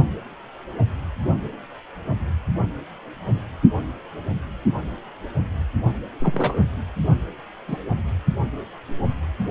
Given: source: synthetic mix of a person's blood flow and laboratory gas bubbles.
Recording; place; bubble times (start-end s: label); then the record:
Doppler ultrasound of blood flow; precordium
6.20-6.61 s: bubbles
7.67-7.77 s: bubbles
From the record:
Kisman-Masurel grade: 122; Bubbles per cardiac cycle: 1 to 2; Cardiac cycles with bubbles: 10 to 50%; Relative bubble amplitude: moderate (0.250 to 0.450); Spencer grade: 2 (many but less than half of the cardiac periods contain bubble signals, singularly or in groups); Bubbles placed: only in the low amplitude regions of the cardiac cycle